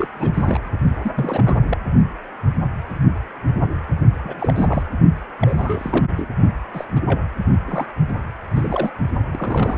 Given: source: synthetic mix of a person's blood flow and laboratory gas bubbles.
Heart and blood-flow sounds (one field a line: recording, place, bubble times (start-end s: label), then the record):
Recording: Doppler ultrasound of blood flow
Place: precordium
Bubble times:
0.00-0.07 s: bubbles
0.16-0.71 s: bubbles
1.02-1.11 s: bubbles
1.16-1.78 s: bubbles
4.23-4.86 s: bubbles
5.41-6.05 s: bubbles
6.17-6.28 s: bubbles
6.73-6.84 s: bubbles
6.96-7.00 s: bubbles
7.07-7.21 s: bubbles
7.66-7.86 s: bubbles
8.55-8.92 s: bubbles
9.31-9.78 s: bubbles
From the record:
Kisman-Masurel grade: 332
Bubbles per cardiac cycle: rolling drumbeat, 9 or more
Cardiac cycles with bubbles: 50 to 99%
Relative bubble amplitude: moderate (0.250 to 0.450)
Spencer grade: 3 (all of the cardiac periods contain showers or single bubble signals, but not dominating or overriding the cardiac motion signals)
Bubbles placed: only in the low amplitude regions of the cardiac cycle